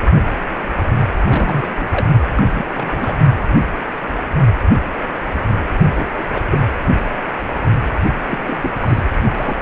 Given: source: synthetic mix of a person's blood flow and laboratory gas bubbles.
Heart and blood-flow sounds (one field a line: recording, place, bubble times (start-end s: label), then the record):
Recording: Doppler ultrasound of blood flow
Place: precordium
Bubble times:
1.26-2.06 s: bubbles
2.36-2.46 s: bubbles
2.55-2.65 s: bubbles
2.74-3.17 s: bubbles
5.80-6.23 s: bubbles
6.33-6.42 s: bubbles
6.50-6.58 s: bubbles
8.29-8.39 s: bubbles
8.47-8.71 s: bubbles
8.81-9.04 s: bubbles
9.25-9.30 s: bubbles
9.33-9.56 s: bubbles
From the record:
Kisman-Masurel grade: 232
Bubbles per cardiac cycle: several, 3 to 8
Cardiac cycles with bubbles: 50 to 99%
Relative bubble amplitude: moderate (0.250 to 0.450)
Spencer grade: 3 (all of the cardiac periods contain showers or single bubble signals, but not dominating or overriding the cardiac motion signals)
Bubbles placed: anywhere in the cardiac cycle